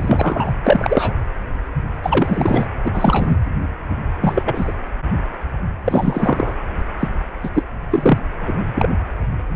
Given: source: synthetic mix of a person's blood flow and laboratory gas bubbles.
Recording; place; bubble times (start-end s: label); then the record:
Doppler ultrasound of blood flow; precordium
0.00-0.52 s: bubbles
0.64-1.24 s: bubbles
2.02-2.67 s: bubbles
2.84-3.37 s: bubbles
4.22-4.73 s: bubbles
5.86-6.54 s: bubbles
7.00-7.09 s: bubbles
7.43-7.50 s: bubbles
7.54-7.66 s: bubbles
7.90-8.26 s: bubbles
8.38-8.89 s: bubbles
From the record:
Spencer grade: 3 (all of the cardiac periods contain showers or single bubble signals, but not dominating or overriding the cardiac motion signals); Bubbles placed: anywhere in the cardiac cycle